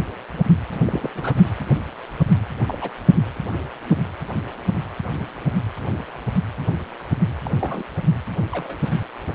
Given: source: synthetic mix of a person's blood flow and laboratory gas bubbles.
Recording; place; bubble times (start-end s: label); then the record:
Doppler ultrasound of blood flow; precordium
0.85-1.10 s: bubbles
1.15-1.34 s: bubbles
2.67-2.78 s: bubbles
2.81-2.91 s: bubbles
7.45-7.50 s: bubbles
7.60-7.83 s: bubbles
8.52-8.79 s: bubbles
From the record:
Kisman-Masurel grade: 121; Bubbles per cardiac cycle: 1 to 2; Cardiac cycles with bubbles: 10 to 50%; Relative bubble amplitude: barely perceptible (0.100 to 0.250); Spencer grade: 2 (many but less than half of the cardiac periods contain bubble signals, singularly or in groups); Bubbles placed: anywhere in the cardiac cycle